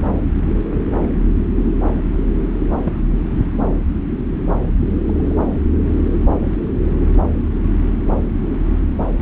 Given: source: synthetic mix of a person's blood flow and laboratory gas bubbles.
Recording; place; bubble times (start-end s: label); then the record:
Doppler ultrasound of blood flow; subclavian vein
2.84-2.93 s: bubbles
3.59-3.69 s: bubbles
5.04-5.38 s: bubbles
5.81-5.89 s: bubbles
6.50-6.58 s: bubbles
6.89-6.96 s: bubbles
From the record:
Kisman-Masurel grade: 122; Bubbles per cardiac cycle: 1 to 2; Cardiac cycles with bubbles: 10 to 50%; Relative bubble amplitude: moderate (0.250 to 0.450); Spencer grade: 2 (many but less than half of the cardiac periods contain bubble signals, singularly or in groups); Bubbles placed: anywhere in the cardiac cycle